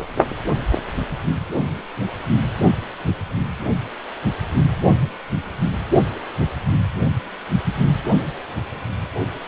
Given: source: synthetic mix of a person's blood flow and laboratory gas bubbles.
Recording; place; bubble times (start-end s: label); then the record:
Doppler ultrasound of blood flow; precordium
no bubbles
From the record:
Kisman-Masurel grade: 000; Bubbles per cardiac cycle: 0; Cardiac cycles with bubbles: 0%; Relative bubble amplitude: no bubbles discernible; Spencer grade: 0 (complete lack of bubble signals)